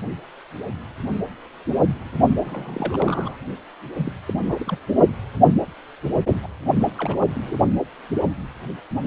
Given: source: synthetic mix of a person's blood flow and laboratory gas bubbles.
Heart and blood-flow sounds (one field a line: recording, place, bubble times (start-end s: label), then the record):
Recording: Doppler ultrasound of blood flow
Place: precordium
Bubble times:
2.36-3.37 s: bubbles
3.98-4.11 s: bubbles
4.26-4.33 s: bubbles
4.48-4.78 s: bubbles
6.42-6.47 s: bubbles
6.97-7.27 s: bubbles
7.34-7.57 s: bubbles
From the record:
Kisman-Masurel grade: 221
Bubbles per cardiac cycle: several, 3 to 8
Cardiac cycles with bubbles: 10 to 50%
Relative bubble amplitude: barely perceptible (0.100 to 0.250)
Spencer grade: 2 (many but less than half of the cardiac periods contain bubble signals, singularly or in groups)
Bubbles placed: only in the low amplitude regions of the cardiac cycle